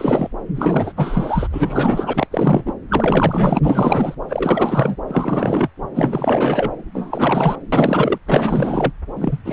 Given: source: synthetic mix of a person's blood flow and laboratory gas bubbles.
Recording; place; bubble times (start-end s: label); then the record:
Doppler ultrasound of blood flow; subclavian vein
0.00-0.28 s: bubbles
0.54-0.93 s: bubbles
0.97-1.48 s: bubbles
1.51-2.27 s: bubbles
2.31-2.73 s: bubbles
2.88-3.59 s: bubbles
3.62-4.15 s: bubbles
4.29-4.96 s: bubbles
5.07-5.68 s: bubbles
5.94-6.76 s: bubbles
6.93-7.56 s: bubbles
7.72-8.18 s: bubbles
8.26-8.92 s: bubbles
9.16-9.38 s: bubbles
9.45-9.53 s: bubbles
From the record:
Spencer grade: 4 (maximum detectable bubble signal sounding continuously throughout systole and diastole of every cardiac period, and overriding the amplitude of the normal cardiac signals); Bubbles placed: anywhere in the cardiac cycle